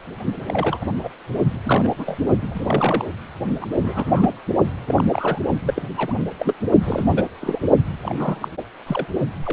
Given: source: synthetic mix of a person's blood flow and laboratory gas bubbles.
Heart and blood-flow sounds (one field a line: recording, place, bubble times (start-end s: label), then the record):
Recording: Doppler ultrasound of blood flow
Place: precordium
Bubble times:
0.00-0.02 s: bubbles
0.48-0.85 s: bubbles
1.03-1.10 s: bubbles
1.66-1.91 s: bubbles
1.98-2.19 s: bubbles
2.41-3.05 s: bubbles
3.61-3.68 s: bubbles
3.78-4.30 s: bubbles
4.88-5.04 s: bubbles
5.12-5.38 s: bubbles
5.66-5.88 s: bubbles
5.96-6.13 s: bubbles
6.17-6.23 s: bubbles
6.40-6.54 s: bubbles
6.83-7.25 s: bubbles
7.41-7.62 s: bubbles
8.03-8.48 s: bubbles
8.87-9.07 s: bubbles
9.43-9.53 s: bubbles
From the record:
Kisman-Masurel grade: 232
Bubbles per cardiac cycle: several, 3 to 8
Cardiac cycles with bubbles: 50 to 99%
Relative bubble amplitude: moderate (0.250 to 0.450)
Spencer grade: 3 (all of the cardiac periods contain showers or single bubble signals, but not dominating or overriding the cardiac motion signals)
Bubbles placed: only in the low amplitude regions of the cardiac cycle